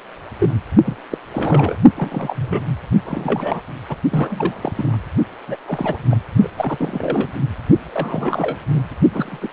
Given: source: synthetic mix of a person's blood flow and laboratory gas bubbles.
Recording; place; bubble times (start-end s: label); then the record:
Doppler ultrasound of blood flow; precordium
0.40-0.53 s: bubbles
0.84-0.96 s: bubbles
1.11-1.18 s: bubbles
1.32-1.76 s: bubbles
1.96-2.75 s: bubbles
3.06-3.61 s: bubbles
3.89-3.96 s: bubbles
4.10-4.73 s: bubbles
4.75-4.98 s: bubbles
5.48-5.56 s: bubbles
5.68-6.17 s: bubbles
6.43-6.49 s: bubbles
6.57-7.30 s: bubbles
7.91-8.58 s: bubbles
8.70-8.82 s: bubbles
9.13-9.48 s: bubbles
From the record:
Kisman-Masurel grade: 242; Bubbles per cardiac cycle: several, 3 to 8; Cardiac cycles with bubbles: 100%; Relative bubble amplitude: moderate (0.250 to 0.450); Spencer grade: 3 (all of the cardiac periods contain showers or single bubble signals, but not dominating or overriding the cardiac motion signals); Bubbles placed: only in the low amplitude regions of the cardiac cycle